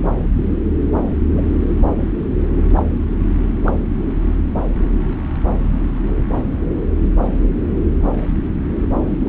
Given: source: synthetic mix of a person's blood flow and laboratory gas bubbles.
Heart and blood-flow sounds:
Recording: Doppler ultrasound of blood flow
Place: subclavian vein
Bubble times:
1.32-1.42 s: bubbles
2.76-2.85 s: bubbles
3.65-3.72 s: bubbles
9.21-9.29 s: bubbles
From the record:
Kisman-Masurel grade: 122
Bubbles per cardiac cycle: 1 to 2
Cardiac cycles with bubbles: 10 to 50%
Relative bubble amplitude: moderate (0.250 to 0.450)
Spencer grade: 2 (many but less than half of the cardiac periods contain bubble signals, singularly or in groups)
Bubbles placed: anywhere in the cardiac cycle

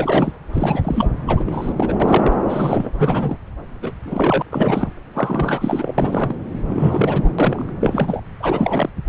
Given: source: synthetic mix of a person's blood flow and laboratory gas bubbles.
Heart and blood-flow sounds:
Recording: Doppler ultrasound of blood flow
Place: subclavian vein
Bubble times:
0.00-0.33 s: bubbles
0.53-1.11 s: bubbles
1.27-1.74 s: bubbles
1.76-1.94 s: bubbles
2.00-2.36 s: bubbles
2.49-2.92 s: bubbles
2.97-3.38 s: bubbles
3.82-3.92 s: bubbles
4.04-4.42 s: bubbles
4.50-4.88 s: bubbles
5.14-5.94 s: bubbles
5.98-6.35 s: bubbles
6.67-7.35 s: bubbles
7.39-7.69 s: bubbles
7.81-8.23 s: bubbles
8.40-8.89 s: bubbles
From the record:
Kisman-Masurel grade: 342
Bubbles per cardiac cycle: rolling drumbeat, 9 or more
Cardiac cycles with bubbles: 100%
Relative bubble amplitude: moderate (0.250 to 0.450)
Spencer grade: 3 (all of the cardiac periods contain showers or single bubble signals, but not dominating or overriding the cardiac motion signals)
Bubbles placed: anywhere in the cardiac cycle

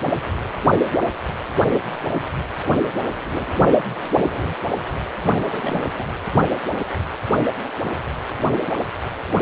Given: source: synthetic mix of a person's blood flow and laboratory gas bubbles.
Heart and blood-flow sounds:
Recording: Doppler ultrasound of blood flow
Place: precordium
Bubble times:
5.17-6.07 s: bubbles
From the record:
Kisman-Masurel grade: 221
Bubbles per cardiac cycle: several, 3 to 8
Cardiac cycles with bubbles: 10 to 50%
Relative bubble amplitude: barely perceptible (0.100 to 0.250)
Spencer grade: 2 (many but less than half of the cardiac periods contain bubble signals, singularly or in groups)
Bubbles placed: anywhere in the cardiac cycle

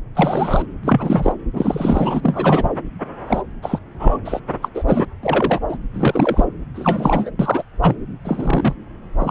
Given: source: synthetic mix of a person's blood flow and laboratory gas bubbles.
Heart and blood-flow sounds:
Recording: Doppler ultrasound of blood flow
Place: subclavian vein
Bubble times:
0.15-0.62 s: bubbles
0.83-1.32 s: bubbles
1.53-2.20 s: bubbles
2.23-2.71 s: bubbles
3.27-3.43 s: bubbles
3.63-3.79 s: bubbles
3.99-4.17 s: bubbles
4.24-4.39 s: bubbles
4.62-4.68 s: bubbles
4.74-4.84 s: bubbles
4.86-5.05 s: bubbles
5.23-5.60 s: bubbles
5.68-5.77 s: bubbles
5.94-6.45 s: bubbles
6.74-7.30 s: bubbles
7.39-7.63 s: bubbles
7.82-7.97 s: bubbles
8.25-8.74 s: bubbles
9.19-9.31 s: bubbles
From the record:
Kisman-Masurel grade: 243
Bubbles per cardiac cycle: several, 3 to 8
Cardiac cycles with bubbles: 100%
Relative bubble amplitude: loud (0.450 to 0.775)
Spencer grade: 3 (all of the cardiac periods contain showers or single bubble signals, but not dominating or overriding the cardiac motion signals)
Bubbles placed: anywhere in the cardiac cycle

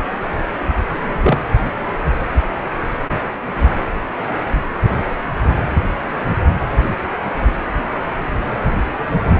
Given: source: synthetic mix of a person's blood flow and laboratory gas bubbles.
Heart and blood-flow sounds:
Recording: Doppler ultrasound of blood flow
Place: precordium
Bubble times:
1.08-1.42 s: bubbles
From the record:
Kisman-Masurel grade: 113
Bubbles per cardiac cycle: 1 to 2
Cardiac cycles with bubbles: 1 to 10%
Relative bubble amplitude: loud (0.450 to 0.775)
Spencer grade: 1 (occasional bubble signal discernible with the cardiac motion signal, with majority of cardiac periods free of bubbles)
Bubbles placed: anywhere in the cardiac cycle

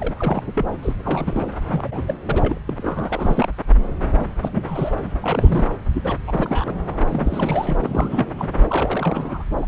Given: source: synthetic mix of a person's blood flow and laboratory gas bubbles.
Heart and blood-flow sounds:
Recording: Doppler ultrasound of blood flow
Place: subclavian vein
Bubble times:
0.00-0.43 s: bubbles
0.56-0.66 s: bubbles
0.82-0.93 s: bubbles
1.03-1.51 s: bubbles
1.67-2.02 s: bubbles
2.08-2.18 s: bubbles
2.27-2.58 s: bubbles
2.68-3.48 s: bubbles
4.19-4.28 s: bubbles
4.42-4.94 s: bubbles
5.21-5.75 s: bubbles
5.93-6.17 s: bubbles
6.26-6.75 s: bubbles
7.09-7.77 s: bubbles
7.81-8.48 s: bubbles
8.62-9.44 s: bubbles
9.62-9.66 s: bubbles
From the record:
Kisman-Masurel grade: 342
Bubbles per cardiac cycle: rolling drumbeat, 9 or more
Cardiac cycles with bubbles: 100%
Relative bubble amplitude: moderate (0.250 to 0.450)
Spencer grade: 3 (all of the cardiac periods contain showers or single bubble signals, but not dominating or overriding the cardiac motion signals)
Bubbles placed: anywhere in the cardiac cycle

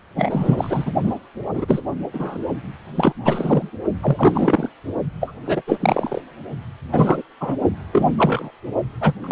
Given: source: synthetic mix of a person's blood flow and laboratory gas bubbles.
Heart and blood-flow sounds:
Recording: Doppler ultrasound of blood flow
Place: precordium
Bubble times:
0.16-0.92 s: bubbles
1.03-1.15 s: bubbles
1.53-1.81 s: bubbles
2.13-2.38 s: bubbles
2.95-3.14 s: bubbles
3.25-3.71 s: bubbles
4.02-4.69 s: bubbles
5.20-5.34 s: bubbles
5.45-5.62 s: bubbles
5.67-5.77 s: bubbles
5.80-6.21 s: bubbles
6.92-7.22 s: bubbles
7.40-7.55 s: bubbles
7.92-8.13 s: bubbles
8.18-8.50 s: bubbles
9.00-9.14 s: bubbles
9.21-9.32 s: bubbles
From the record:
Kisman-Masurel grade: 243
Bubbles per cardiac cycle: several, 3 to 8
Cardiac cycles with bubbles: 100%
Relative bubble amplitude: loud (0.450 to 0.775)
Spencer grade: 3 (all of the cardiac periods contain showers or single bubble signals, but not dominating or overriding the cardiac motion signals)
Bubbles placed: only in the low amplitude regions of the cardiac cycle

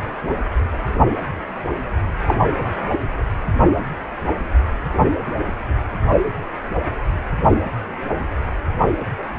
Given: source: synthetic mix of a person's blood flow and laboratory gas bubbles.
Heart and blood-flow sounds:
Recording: Doppler ultrasound of blood flow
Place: precordium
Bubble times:
2.27-2.38 s: bubbles
From the record:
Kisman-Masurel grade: 112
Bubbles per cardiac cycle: 1 to 2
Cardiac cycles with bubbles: 1 to 10%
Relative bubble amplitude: moderate (0.250 to 0.450)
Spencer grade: 1 (occasional bubble signal discernible with the cardiac motion signal, with majority of cardiac periods free of bubbles)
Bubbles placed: anywhere in the cardiac cycle

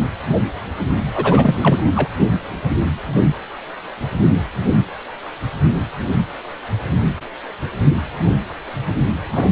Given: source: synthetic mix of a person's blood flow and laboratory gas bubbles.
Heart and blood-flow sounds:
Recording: Doppler ultrasound of blood flow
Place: precordium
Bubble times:
1.14-2.09 s: bubbles
9.31-9.52 s: bubbles
From the record:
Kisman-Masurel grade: 222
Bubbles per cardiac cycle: several, 3 to 8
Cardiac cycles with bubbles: 10 to 50%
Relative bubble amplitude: moderate (0.250 to 0.450)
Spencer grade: 2 (many but less than half of the cardiac periods contain bubble signals, singularly or in groups)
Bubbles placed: only in the low amplitude regions of the cardiac cycle

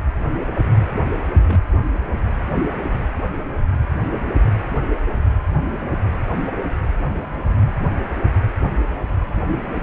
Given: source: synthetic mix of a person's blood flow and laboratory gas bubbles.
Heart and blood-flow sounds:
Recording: Doppler ultrasound of blood flow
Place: precordium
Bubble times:
1.46-1.61 s: bubbles
From the record:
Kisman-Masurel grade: 111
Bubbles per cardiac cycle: 1 to 2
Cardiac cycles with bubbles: 1 to 10%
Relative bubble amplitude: barely perceptible (0.100 to 0.250)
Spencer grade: 1 (occasional bubble signal discernible with the cardiac motion signal, with majority of cardiac periods free of bubbles)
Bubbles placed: anywhere in the cardiac cycle

